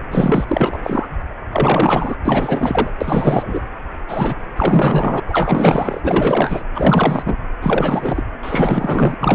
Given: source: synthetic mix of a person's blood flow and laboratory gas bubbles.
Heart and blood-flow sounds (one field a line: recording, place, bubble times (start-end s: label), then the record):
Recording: Doppler ultrasound of blood flow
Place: precordium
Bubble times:
0.11-0.45 s: bubbles
0.47-1.07 s: bubbles
1.51-2.16 s: bubbles
2.25-2.91 s: bubbles
3.00-3.62 s: bubbles
4.08-4.35 s: bubbles
4.57-5.20 s: bubbles
5.28-6.01 s: bubbles
6.04-6.63 s: bubbles
6.75-7.23 s: bubbles
7.25-7.36 s: bubbles
7.62-8.24 s: bubbles
8.43-9.17 s: bubbles
9.20-9.35 s: bubbles
From the record:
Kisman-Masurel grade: 444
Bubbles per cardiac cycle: continuous sound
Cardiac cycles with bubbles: 100%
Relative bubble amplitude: maximal (0.775 to 0.999)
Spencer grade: 4 (maximum detectable bubble signal sounding continuously throughout systole and diastole of every cardiac period, and overriding the amplitude of the normal cardiac signals)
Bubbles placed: anywhere in the cardiac cycle